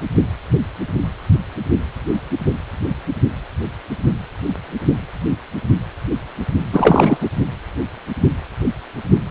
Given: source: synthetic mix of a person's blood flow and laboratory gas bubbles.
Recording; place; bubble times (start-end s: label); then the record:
Doppler ultrasound of blood flow; precordium
6.71-7.18 s: bubbles
7.21-7.29 s: bubbles
From the record:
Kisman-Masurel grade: 213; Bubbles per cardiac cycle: several, 3 to 8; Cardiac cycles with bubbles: 1 to 10%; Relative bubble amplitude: loud (0.450 to 0.775); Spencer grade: 1 (occasional bubble signal discernible with the cardiac motion signal, with majority of cardiac periods free of bubbles); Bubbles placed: only in the low amplitude regions of the cardiac cycle